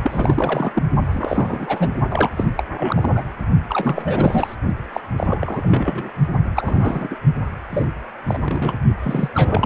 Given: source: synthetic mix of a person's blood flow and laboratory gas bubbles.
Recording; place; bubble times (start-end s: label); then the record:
Doppler ultrasound of blood flow; precordium
0.02-0.83 s: bubbles
1.12-1.99 s: bubbles
2.10-2.29 s: bubbles
2.37-2.46 s: bubbles
2.56-2.65 s: bubbles
2.75-3.23 s: bubbles
3.69-4.55 s: bubbles
4.92-5.00 s: bubbles
5.17-6.10 s: bubbles
6.54-7.16 s: bubbles
7.71-7.85 s: bubbles
8.27-8.76 s: bubbles
9.01-9.29 s: bubbles
9.34-9.66 s: bubbles
From the record:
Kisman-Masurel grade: 342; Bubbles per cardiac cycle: rolling drumbeat, 9 or more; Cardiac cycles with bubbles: 100%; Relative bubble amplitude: moderate (0.250 to 0.450); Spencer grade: 3 (all of the cardiac periods contain showers or single bubble signals, but not dominating or overriding the cardiac motion signals); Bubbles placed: only in the low amplitude regions of the cardiac cycle